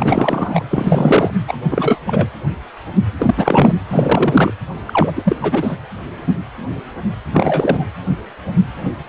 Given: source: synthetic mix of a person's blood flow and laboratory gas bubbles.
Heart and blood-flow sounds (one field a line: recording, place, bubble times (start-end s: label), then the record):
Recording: Doppler ultrasound of blood flow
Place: precordium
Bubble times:
0.00-0.64 s: bubbles
0.71-1.30 s: bubbles
1.48-1.58 s: bubbles
1.71-1.98 s: bubbles
2.06-2.27 s: bubbles
3.19-3.74 s: bubbles
3.90-4.52 s: bubbles
4.87-5.12 s: bubbles
5.15-5.36 s: bubbles
5.41-5.76 s: bubbles
7.33-7.88 s: bubbles
From the record:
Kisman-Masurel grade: 333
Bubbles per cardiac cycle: rolling drumbeat, 9 or more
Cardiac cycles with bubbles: 50 to 99%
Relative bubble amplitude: loud (0.450 to 0.775)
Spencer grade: 3 (all of the cardiac periods contain showers or single bubble signals, but not dominating or overriding the cardiac motion signals)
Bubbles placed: anywhere in the cardiac cycle